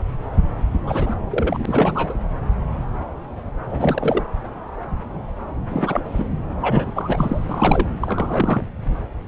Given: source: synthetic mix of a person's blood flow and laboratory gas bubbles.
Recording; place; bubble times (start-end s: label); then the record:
Doppler ultrasound of blood flow; subclavian vein
0.85-1.15 s: bubbles
1.30-2.15 s: bubbles
3.65-4.23 s: bubbles
5.70-6.28 s: bubbles
6.60-7.45 s: bubbles
7.49-7.88 s: bubbles
8.00-8.62 s: bubbles
From the record:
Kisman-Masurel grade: 332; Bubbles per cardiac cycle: rolling drumbeat, 9 or more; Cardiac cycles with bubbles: 50 to 99%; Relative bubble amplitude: moderate (0.250 to 0.450); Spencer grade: 3 (all of the cardiac periods contain showers or single bubble signals, but not dominating or overriding the cardiac motion signals); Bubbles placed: anywhere in the cardiac cycle